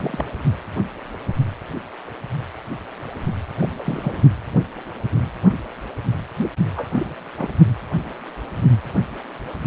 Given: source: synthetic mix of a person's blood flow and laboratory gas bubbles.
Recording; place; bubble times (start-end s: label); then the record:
Doppler ultrasound of blood flow; precordium
0.00-0.33 s: bubbles
3.60-3.69 s: bubbles
3.79-4.20 s: bubbles
6.75-7.15 s: bubbles
7.38-7.50 s: bubbles
From the record:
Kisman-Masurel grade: 221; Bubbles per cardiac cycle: several, 3 to 8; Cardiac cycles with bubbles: 10 to 50%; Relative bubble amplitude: barely perceptible (0.100 to 0.250); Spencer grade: 2 (many but less than half of the cardiac periods contain bubble signals, singularly or in groups); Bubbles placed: only in the low amplitude regions of the cardiac cycle